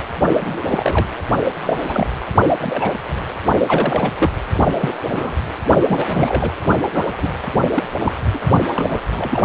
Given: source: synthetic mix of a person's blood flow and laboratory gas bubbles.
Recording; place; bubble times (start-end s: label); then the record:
Doppler ultrasound of blood flow; precordium
0.39-1.07 s: bubbles
1.62-1.77 s: bubbles
1.87-2.08 s: bubbles
2.60-2.95 s: bubbles
3.67-4.12 s: bubbles
4.19-4.30 s: bubbles
4.77-4.94 s: bubbles
5.12-5.35 s: bubbles
5.88-6.53 s: bubbles
6.92-7.04 s: bubbles
7.21-7.29 s: bubbles
7.73-7.83 s: bubbles
7.98-8.12 s: bubbles
8.33-8.38 s: bubbles
8.72-9.02 s: bubbles
9.16-9.45 s: bubbles
From the record:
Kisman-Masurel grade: 242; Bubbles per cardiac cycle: several, 3 to 8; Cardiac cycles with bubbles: 100%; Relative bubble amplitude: moderate (0.250 to 0.450); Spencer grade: 3 (all of the cardiac periods contain showers or single bubble signals, but not dominating or overriding the cardiac motion signals); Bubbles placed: only in the low amplitude regions of the cardiac cycle